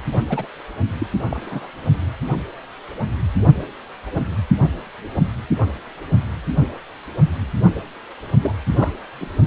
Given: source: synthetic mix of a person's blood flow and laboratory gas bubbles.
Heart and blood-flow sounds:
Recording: Doppler ultrasound of blood flow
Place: precordium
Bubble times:
0.12-0.21 s: bubbles
0.27-0.47 s: bubbles
1.00-1.07 s: bubbles
1.30-1.67 s: bubbles
8.42-8.55 s: bubbles
8.76-8.91 s: bubbles
9.19-9.30 s: bubbles
From the record:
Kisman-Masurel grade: 222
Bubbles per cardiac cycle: several, 3 to 8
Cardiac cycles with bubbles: 10 to 50%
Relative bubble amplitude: moderate (0.250 to 0.450)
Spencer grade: 2 (many but less than half of the cardiac periods contain bubble signals, singularly or in groups)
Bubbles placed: only in the low amplitude regions of the cardiac cycle

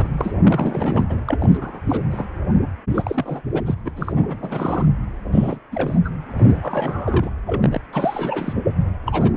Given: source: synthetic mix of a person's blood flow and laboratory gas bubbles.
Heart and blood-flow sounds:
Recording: Doppler ultrasound of blood flow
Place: precordium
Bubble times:
0.00-0.07 s: bubbles
0.17-1.23 s: bubbles
1.26-1.80 s: bubbles
1.89-2.03 s: bubbles
2.11-2.25 s: bubbles
2.95-3.41 s: bubbles
3.54-3.61 s: bubbles
3.66-3.75 s: bubbles
3.85-3.90 s: bubbles
3.96-4.12 s: bubbles
4.15-4.86 s: bubbles
5.32-5.59 s: bubbles
5.71-6.09 s: bubbles
6.37-7.30 s: bubbles
7.46-7.81 s: bubbles
7.93-8.54 s: bubbles
9.06-9.32 s: bubbles
From the record:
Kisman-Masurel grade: 342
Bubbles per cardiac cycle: rolling drumbeat, 9 or more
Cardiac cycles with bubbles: 100%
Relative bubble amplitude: moderate (0.250 to 0.450)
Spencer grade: 3 (all of the cardiac periods contain showers or single bubble signals, but not dominating or overriding the cardiac motion signals)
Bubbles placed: anywhere in the cardiac cycle

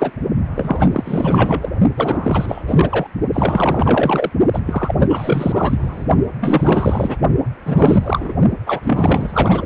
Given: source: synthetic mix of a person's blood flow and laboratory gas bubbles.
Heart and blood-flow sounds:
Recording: Doppler ultrasound of blood flow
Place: precordium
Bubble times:
0.00-0.11 s: bubbles
0.55-1.69 s: bubbles
1.96-2.62 s: bubbles
2.68-3.07 s: bubbles
3.33-4.29 s: bubbles
4.53-4.60 s: bubbles
4.66-4.95 s: bubbles
4.97-6.07 s: bubbles
6.40-7.17 s: bubbles
7.65-8.32 s: bubbles
8.66-8.80 s: bubbles
8.83-9.66 s: bubbles
From the record:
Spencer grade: 4 (maximum detectable bubble signal sounding continuously throughout systole and diastole of every cardiac period, and overriding the amplitude of the normal cardiac signals)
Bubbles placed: only in the low amplitude regions of the cardiac cycle

